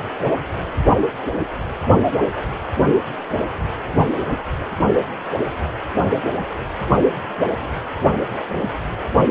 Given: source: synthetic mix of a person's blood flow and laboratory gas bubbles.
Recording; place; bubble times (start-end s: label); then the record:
Doppler ultrasound of blood flow; precordium
no bubbles
From the record:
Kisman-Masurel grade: 000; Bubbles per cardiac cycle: 0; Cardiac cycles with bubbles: 0%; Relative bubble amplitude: no bubbles discernible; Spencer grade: 0 (complete lack of bubble signals)